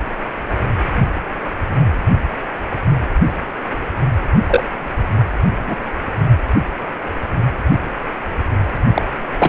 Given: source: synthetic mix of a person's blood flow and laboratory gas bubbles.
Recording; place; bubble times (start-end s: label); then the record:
Doppler ultrasound of blood flow; precordium
4.46-4.63 s: bubbles
5.67-5.76 s: bubbles
8.94-9.02 s: bubbles
9.39-9.49 s: bubbles
From the record:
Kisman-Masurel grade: 123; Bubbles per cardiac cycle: 1 to 2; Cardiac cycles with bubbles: 10 to 50%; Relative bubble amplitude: loud (0.450 to 0.775); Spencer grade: 2 (many but less than half of the cardiac periods contain bubble signals, singularly or in groups); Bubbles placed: anywhere in the cardiac cycle